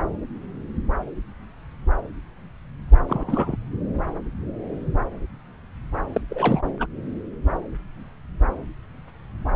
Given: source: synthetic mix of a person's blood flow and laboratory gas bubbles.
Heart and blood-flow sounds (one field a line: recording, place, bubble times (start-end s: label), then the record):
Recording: Doppler ultrasound of blood flow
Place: subclavian vein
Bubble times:
3.06-3.56 s: bubbles
6.12-6.21 s: bubbles
6.30-6.62 s: bubbles
6.80-6.86 s: bubbles
From the record:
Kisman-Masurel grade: 222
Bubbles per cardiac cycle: several, 3 to 8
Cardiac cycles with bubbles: 10 to 50%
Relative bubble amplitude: moderate (0.250 to 0.450)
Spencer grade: 2 (many but less than half of the cardiac periods contain bubble signals, singularly or in groups)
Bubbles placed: anywhere in the cardiac cycle